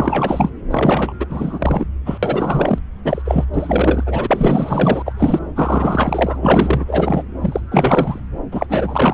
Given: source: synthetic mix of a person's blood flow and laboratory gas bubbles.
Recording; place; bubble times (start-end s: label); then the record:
Doppler ultrasound of blood flow; subclavian vein
0.00-0.51 s: bubbles
0.71-1.13 s: bubbles
1.20-1.27 s: bubbles
1.29-1.86 s: bubbles
2.05-2.18 s: bubbles
2.22-2.79 s: bubbles
3.04-3.22 s: bubbles
3.25-3.45 s: bubbles
3.54-5.12 s: bubbles
5.17-5.39 s: bubbles
5.56-6.39 s: bubbles
6.42-6.84 s: bubbles
6.87-7.23 s: bubbles
7.41-7.60 s: bubbles
7.71-8.20 s: bubbles
8.51-9.14 s: bubbles
From the record:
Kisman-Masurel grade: 444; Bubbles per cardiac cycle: continuous sound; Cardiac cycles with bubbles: 100%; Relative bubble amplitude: maximal (0.775 to 0.999); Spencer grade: 4 (maximum detectable bubble signal sounding continuously throughout systole and diastole of every cardiac period, and overriding the amplitude of the normal cardiac signals); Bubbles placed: anywhere in the cardiac cycle